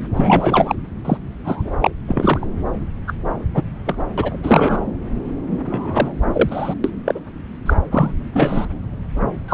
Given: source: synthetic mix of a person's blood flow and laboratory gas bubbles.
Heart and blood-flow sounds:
Doppler ultrasound of blood flow; subclavian vein
0.16-0.75 s: bubbles
1.04-1.17 s: bubbles
1.44-1.71 s: bubbles
1.81-1.91 s: bubbles
2.08-2.47 s: bubbles
3.07-3.13 s: bubbles
3.54-3.64 s: bubbles
3.86-3.97 s: bubbles
4.17-4.37 s: bubbles
4.42-4.81 s: bubbles
5.50-5.58 s: bubbles
5.65-6.13 s: bubbles
6.32-6.75 s: bubbles
6.84-6.90 s: bubbles
7.05-7.20 s: bubbles
7.65-7.73 s: bubbles
7.91-8.13 s: bubbles
8.34-8.67 s: bubbles
9.48-9.54 s: bubbles
From the record:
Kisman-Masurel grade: 233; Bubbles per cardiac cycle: several, 3 to 8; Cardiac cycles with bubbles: 50 to 99%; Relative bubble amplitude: loud (0.450 to 0.775); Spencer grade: 3 (all of the cardiac periods contain showers or single bubble signals, but not dominating or overriding the cardiac motion signals); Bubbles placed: anywhere in the cardiac cycle

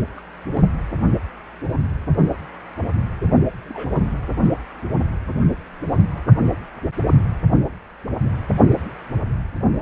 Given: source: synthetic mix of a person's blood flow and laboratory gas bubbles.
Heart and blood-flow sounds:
Doppler ultrasound of blood flow; precordium
0.17-0.22 s: bubbles
0.55-0.61 s: bubbles
3.69-3.95 s: bubbles
From the record:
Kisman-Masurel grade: 121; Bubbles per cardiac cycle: 1 to 2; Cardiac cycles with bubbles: 10 to 50%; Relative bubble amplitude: barely perceptible (0.100 to 0.250); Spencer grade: 2 (many but less than half of the cardiac periods contain bubble signals, singularly or in groups); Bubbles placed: only in the low amplitude regions of the cardiac cycle

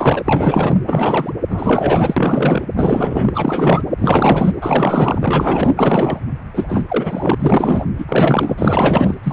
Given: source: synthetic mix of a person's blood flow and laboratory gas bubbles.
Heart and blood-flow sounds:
Doppler ultrasound of blood flow; precordium
0.00-0.22 s: bubbles
0.24-0.78 s: bubbles
0.86-1.33 s: bubbles
1.49-2.65 s: bubbles
2.75-3.82 s: bubbles
3.98-4.54 s: bubbles
4.61-5.74 s: bubbles
5.77-6.21 s: bubbles
6.54-6.64 s: bubbles
6.68-6.84 s: bubbles
6.88-7.34 s: bubbles
7.39-7.85 s: bubbles
7.98-8.05 s: bubbles
8.08-9.15 s: bubbles
9.23-9.33 s: bubbles
From the record:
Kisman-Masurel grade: 444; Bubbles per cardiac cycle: continuous sound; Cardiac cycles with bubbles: 100%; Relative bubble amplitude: maximal (0.775 to 0.999); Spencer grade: 4 (maximum detectable bubble signal sounding continuously throughout systole and diastole of every cardiac period, and overriding the amplitude of the normal cardiac signals); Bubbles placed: anywhere in the cardiac cycle

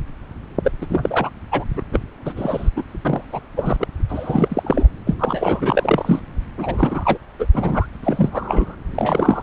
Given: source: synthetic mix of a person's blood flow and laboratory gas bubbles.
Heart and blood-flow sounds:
Doppler ultrasound of blood flow; subclavian vein
0.63-0.71 s: bubbles
0.81-0.86 s: bubbles
0.89-1.31 s: bubbles
1.51-1.65 s: bubbles
1.77-1.82 s: bubbles
1.92-2.00 s: bubbles
2.25-2.33 s: bubbles
2.36-2.70 s: bubbles
2.76-2.82 s: bubbles
3.05-3.42 s: bubbles
3.56-3.76 s: bubbles
3.79-3.88 s: bubbles
4.09-4.89 s: bubbles
5.06-5.14 s: bubbles
5.18-6.20 s: bubbles
6.58-7.18 s: bubbles
7.39-7.47 s: bubbles
7.54-7.88 s: bubbles
8.03-8.75 s: bubbles
8.95-9.42 s: bubbles
From the record:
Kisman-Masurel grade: 342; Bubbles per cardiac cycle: rolling drumbeat, 9 or more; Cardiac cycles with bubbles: 100%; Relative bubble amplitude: moderate (0.250 to 0.450); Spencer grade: 3 (all of the cardiac periods contain showers or single bubble signals, but not dominating or overriding the cardiac motion signals); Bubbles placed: anywhere in the cardiac cycle

